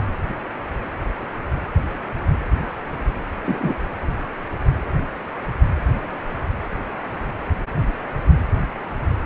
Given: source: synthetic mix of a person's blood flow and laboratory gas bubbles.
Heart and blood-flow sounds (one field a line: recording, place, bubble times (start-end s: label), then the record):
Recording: Doppler ultrasound of blood flow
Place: precordium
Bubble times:
3.46-3.75 s: bubbles
From the record:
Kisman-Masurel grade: 112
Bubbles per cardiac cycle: 1 to 2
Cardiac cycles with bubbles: 1 to 10%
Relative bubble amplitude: moderate (0.250 to 0.450)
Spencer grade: 1 (occasional bubble signal discernible with the cardiac motion signal, with majority of cardiac periods free of bubbles)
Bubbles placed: anywhere in the cardiac cycle